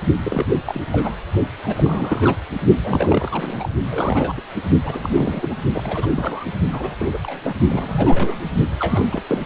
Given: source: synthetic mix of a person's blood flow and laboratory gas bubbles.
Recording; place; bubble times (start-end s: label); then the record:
Doppler ultrasound of blood flow; precordium
0.23-0.46 s: bubbles
0.66-1.16 s: bubbles
1.60-2.39 s: bubbles
2.83-3.75 s: bubbles
3.90-4.40 s: bubbles
4.83-5.55 s: bubbles
5.73-6.07 s: bubbles
6.14-6.45 s: bubbles
6.71-7.17 s: bubbles
7.23-7.40 s: bubbles
7.43-7.54 s: bubbles
7.68-8.53 s: bubbles
8.79-9.07 s: bubbles
9.11-9.21 s: bubbles
9.29-9.46 s: bubbles
From the record:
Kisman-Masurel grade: 332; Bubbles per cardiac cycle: rolling drumbeat, 9 or more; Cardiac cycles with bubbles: 50 to 99%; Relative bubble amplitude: moderate (0.250 to 0.450); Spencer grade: 3 (all of the cardiac periods contain showers or single bubble signals, but not dominating or overriding the cardiac motion signals); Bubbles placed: only in the low amplitude regions of the cardiac cycle